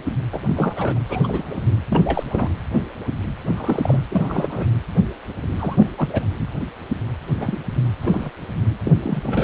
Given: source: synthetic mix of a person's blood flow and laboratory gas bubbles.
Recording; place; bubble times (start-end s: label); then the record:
Doppler ultrasound of blood flow; precordium
0.33-0.39 s: bubbles
0.46-0.99 s: bubbles
1.08-1.62 s: bubbles
1.90-2.23 s: bubbles
2.30-2.50 s: bubbles
3.46-3.99 s: bubbles
4.09-4.66 s: bubbles
5.59-5.87 s: bubbles
5.97-6.08 s: bubbles
6.12-6.25 s: bubbles
7.40-7.60 s: bubbles
8.01-8.30 s: bubbles
8.85-8.92 s: bubbles
9.03-9.44 s: bubbles
From the record:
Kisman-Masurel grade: 232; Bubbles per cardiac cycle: several, 3 to 8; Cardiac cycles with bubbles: 50 to 99%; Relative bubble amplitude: moderate (0.250 to 0.450); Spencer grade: 3 (all of the cardiac periods contain showers or single bubble signals, but not dominating or overriding the cardiac motion signals); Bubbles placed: anywhere in the cardiac cycle